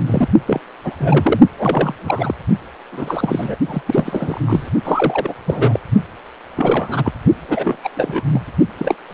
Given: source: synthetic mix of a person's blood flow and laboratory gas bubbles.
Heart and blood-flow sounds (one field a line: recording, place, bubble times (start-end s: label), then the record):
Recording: Doppler ultrasound of blood flow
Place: precordium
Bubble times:
0.01-0.28 s: bubbles
0.47-0.60 s: bubbles
0.84-0.93 s: bubbles
1.00-1.40 s: bubbles
1.56-1.95 s: bubbles
2.00-2.34 s: bubbles
2.92-3.55 s: bubbles
3.66-3.82 s: bubbles
3.87-4.70 s: bubbles
4.84-5.35 s: bubbles
5.46-5.79 s: bubbles
6.56-7.12 s: bubbles
7.48-7.77 s: bubbles
7.83-7.89 s: bubbles
7.95-8.23 s: bubbles
8.31-8.41 s: bubbles
8.79-8.95 s: bubbles
9.10-9.14 s: bubbles
From the record:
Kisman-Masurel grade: 342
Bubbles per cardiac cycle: rolling drumbeat, 9 or more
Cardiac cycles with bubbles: 100%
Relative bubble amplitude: moderate (0.250 to 0.450)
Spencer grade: 3 (all of the cardiac periods contain showers or single bubble signals, but not dominating or overriding the cardiac motion signals)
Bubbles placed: only in the low amplitude regions of the cardiac cycle